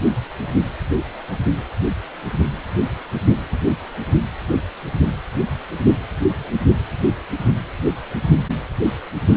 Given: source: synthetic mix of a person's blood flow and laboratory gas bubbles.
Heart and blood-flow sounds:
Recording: Doppler ultrasound of blood flow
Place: precordium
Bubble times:
no bubbles
From the record:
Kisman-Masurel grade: 000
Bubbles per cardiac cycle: 0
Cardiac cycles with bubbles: 0%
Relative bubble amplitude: no bubbles discernible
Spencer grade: 0 (complete lack of bubble signals)

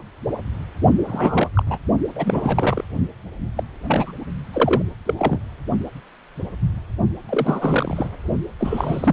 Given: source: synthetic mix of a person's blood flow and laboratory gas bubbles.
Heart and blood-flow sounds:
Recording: Doppler ultrasound of blood flow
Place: precordium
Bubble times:
1.06-1.49 s: bubbles
1.54-1.63 s: bubbles
1.67-1.78 s: bubbles
2.15-2.84 s: bubbles
3.56-3.63 s: bubbles
3.88-4.12 s: bubbles
4.53-4.82 s: bubbles
5.05-5.13 s: bubbles
5.18-5.38 s: bubbles
7.29-8.08 s: bubbles
8.59-9.13 s: bubbles
From the record:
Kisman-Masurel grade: 232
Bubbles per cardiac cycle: several, 3 to 8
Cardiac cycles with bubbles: 50 to 99%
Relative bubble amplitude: moderate (0.250 to 0.450)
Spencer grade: 3 (all of the cardiac periods contain showers or single bubble signals, but not dominating or overriding the cardiac motion signals)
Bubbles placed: only in the low amplitude regions of the cardiac cycle

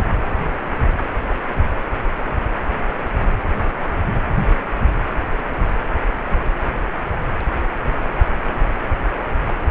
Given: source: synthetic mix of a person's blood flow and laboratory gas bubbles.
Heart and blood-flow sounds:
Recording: Doppler ultrasound of blood flow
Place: precordium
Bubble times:
no bubbles
From the record:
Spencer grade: 0 (complete lack of bubble signals)

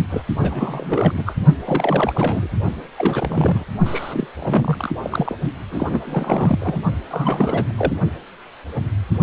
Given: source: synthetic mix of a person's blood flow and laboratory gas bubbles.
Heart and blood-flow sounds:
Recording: Doppler ultrasound of blood flow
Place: precordium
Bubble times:
0.10-0.22 s: bubbles
0.39-1.23 s: bubbles
1.26-1.33 s: bubbles
1.66-2.48 s: bubbles
2.96-3.65 s: bubbles
3.85-4.27 s: bubbles
4.39-4.94 s: bubbles
5.03-5.35 s: bubbles
5.70-6.80 s: bubbles
7.10-7.73 s: bubbles
7.77-7.93 s: bubbles
From the record:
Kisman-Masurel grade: 332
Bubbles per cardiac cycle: rolling drumbeat, 9 or more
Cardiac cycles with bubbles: 50 to 99%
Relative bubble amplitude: moderate (0.250 to 0.450)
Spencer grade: 3 (all of the cardiac periods contain showers or single bubble signals, but not dominating or overriding the cardiac motion signals)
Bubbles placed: only in the low amplitude regions of the cardiac cycle

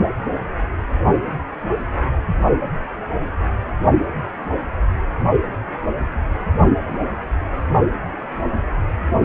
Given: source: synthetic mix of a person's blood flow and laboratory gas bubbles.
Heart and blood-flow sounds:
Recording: Doppler ultrasound of blood flow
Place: precordium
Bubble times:
no bubbles
From the record:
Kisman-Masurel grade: 000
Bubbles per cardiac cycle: 0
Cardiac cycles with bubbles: 0%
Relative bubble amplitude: no bubbles discernible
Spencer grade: 0 (complete lack of bubble signals)

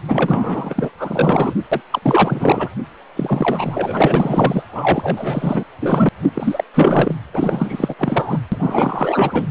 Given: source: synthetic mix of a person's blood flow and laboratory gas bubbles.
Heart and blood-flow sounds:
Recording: Doppler ultrasound of blood flow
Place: precordium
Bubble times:
0.08-0.90 s: bubbles
0.98-1.54 s: bubbles
1.71-1.81 s: bubbles
1.90-2.00 s: bubbles
2.02-2.69 s: bubbles
3.15-4.63 s: bubbles
4.68-5.64 s: bubbles
5.80-6.09 s: bubbles
6.22-6.30 s: bubbles
6.34-6.64 s: bubbles
6.74-7.14 s: bubbles
7.33-7.95 s: bubbles
7.98-8.39 s: bubbles
8.52-9.48 s: bubbles
From the record:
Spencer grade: 4 (maximum detectable bubble signal sounding continuously throughout systole and diastole of every cardiac period, and overriding the amplitude of the normal cardiac signals)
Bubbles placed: anywhere in the cardiac cycle

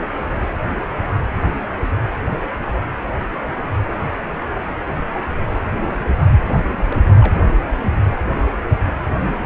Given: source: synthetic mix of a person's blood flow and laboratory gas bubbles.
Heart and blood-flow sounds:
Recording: Doppler ultrasound of blood flow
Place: precordium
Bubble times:
6.40-6.67 s: bubbles
6.76-6.84 s: bubbles
6.89-6.96 s: bubbles
7.17-7.49 s: bubbles
From the record:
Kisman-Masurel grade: 211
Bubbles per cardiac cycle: several, 3 to 8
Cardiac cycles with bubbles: 1 to 10%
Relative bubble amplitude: barely perceptible (0.100 to 0.250)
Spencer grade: 1 (occasional bubble signal discernible with the cardiac motion signal, with majority of cardiac periods free of bubbles)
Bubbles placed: anywhere in the cardiac cycle

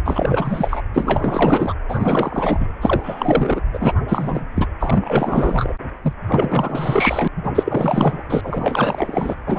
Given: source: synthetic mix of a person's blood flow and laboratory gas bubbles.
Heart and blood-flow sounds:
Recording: Doppler ultrasound of blood flow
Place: precordium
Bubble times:
0.05-0.82 s: bubbles
0.93-1.73 s: bubbles
1.89-2.67 s: bubbles
2.81-3.61 s: bubbles
3.73-3.94 s: bubbles
4.08-4.46 s: bubbles
4.55-4.67 s: bubbles
4.79-5.73 s: bubbles
6.03-6.14 s: bubbles
6.28-7.28 s: bubbles
7.36-7.51 s: bubbles
7.54-8.24 s: bubbles
8.29-9.35 s: bubbles
9.46-9.59 s: bubbles
From the record:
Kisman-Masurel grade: 444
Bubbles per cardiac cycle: continuous sound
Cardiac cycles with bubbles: 100%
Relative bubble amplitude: maximal (0.775 to 0.999)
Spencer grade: 4 (maximum detectable bubble signal sounding continuously throughout systole and diastole of every cardiac period, and overriding the amplitude of the normal cardiac signals)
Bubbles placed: anywhere in the cardiac cycle

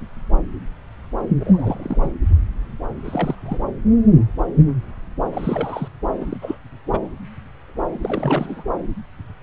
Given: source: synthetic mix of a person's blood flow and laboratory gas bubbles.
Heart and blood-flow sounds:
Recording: Doppler ultrasound of blood flow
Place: subclavian vein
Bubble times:
1.40-2.12 s: bubbles
3.04-3.35 s: bubbles
3.46-3.58 s: bubbles
5.30-5.88 s: bubbles
6.20-6.37 s: bubbles
6.41-6.59 s: bubbles
6.91-6.98 s: bubbles
8.02-8.63 s: bubbles
From the record:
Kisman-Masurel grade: 222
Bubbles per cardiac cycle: several, 3 to 8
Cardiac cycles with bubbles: 10 to 50%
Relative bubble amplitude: moderate (0.250 to 0.450)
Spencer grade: 2 (many but less than half of the cardiac periods contain bubble signals, singularly or in groups)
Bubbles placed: anywhere in the cardiac cycle

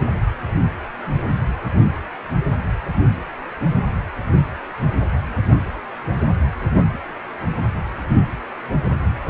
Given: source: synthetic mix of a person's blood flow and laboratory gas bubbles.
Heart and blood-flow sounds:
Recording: Doppler ultrasound of blood flow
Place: precordium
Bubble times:
no bubbles
From the record:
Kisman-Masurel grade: 000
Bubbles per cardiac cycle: 0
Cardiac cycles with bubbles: 0%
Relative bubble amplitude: no bubbles discernible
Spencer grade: 0 (complete lack of bubble signals)

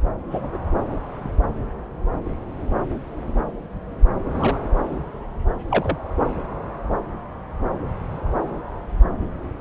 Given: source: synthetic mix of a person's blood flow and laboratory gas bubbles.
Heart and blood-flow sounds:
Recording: Doppler ultrasound of blood flow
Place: subclavian vein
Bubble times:
0.30-0.58 s: bubbles
4.30-4.58 s: bubbles
5.70-5.96 s: bubbles
From the record:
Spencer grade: 2 (many but less than half of the cardiac periods contain bubble signals, singularly or in groups)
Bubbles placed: anywhere in the cardiac cycle

